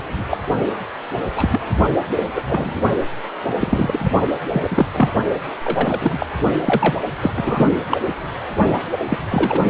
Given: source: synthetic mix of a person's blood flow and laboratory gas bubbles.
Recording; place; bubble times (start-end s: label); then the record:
Doppler ultrasound of blood flow; precordium
0.00-0.25 s: bubbles
0.30-0.38 s: bubbles
1.35-1.60 s: bubbles
1.99-2.31 s: bubbles
2.35-2.41 s: bubbles
2.47-2.80 s: bubbles
3.60-4.11 s: bubbles
4.50-4.86 s: bubbles
4.94-5.09 s: bubbles
5.63-6.26 s: bubbles
6.56-7.00 s: bubbles
7.23-7.32 s: bubbles
7.36-7.67 s: bubbles
7.89-7.97 s: bubbles
9.09-9.18 s: bubbles
9.29-9.63 s: bubbles
From the record:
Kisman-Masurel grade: 243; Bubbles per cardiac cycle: several, 3 to 8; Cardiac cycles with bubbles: 100%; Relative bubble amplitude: loud (0.450 to 0.775); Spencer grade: 3 (all of the cardiac periods contain showers or single bubble signals, but not dominating or overriding the cardiac motion signals); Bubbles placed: only in the low amplitude regions of the cardiac cycle